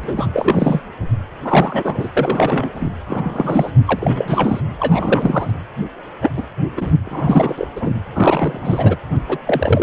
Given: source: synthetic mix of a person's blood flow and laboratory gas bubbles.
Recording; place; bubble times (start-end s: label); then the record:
Doppler ultrasound of blood flow; precordium
0.03-0.27 s: bubbles
0.33-0.81 s: bubbles
1.42-2.09 s: bubbles
2.16-2.69 s: bubbles
2.74-2.90 s: bubbles
3.08-3.71 s: bubbles
3.85-4.61 s: bubbles
4.79-5.50 s: bubbles
6.21-6.29 s: bubbles
6.36-6.47 s: bubbles
6.77-6.94 s: bubbles
7.04-7.68 s: bubbles
7.75-7.93 s: bubbles
8.15-8.96 s: bubbles
9.28-9.38 s: bubbles
9.46-9.83 s: bubbles
From the record:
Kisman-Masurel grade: 343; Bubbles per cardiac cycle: rolling drumbeat, 9 or more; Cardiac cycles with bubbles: 100%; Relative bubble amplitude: loud (0.450 to 0.775); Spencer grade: 3 (all of the cardiac periods contain showers or single bubble signals, but not dominating or overriding the cardiac motion signals); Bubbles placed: anywhere in the cardiac cycle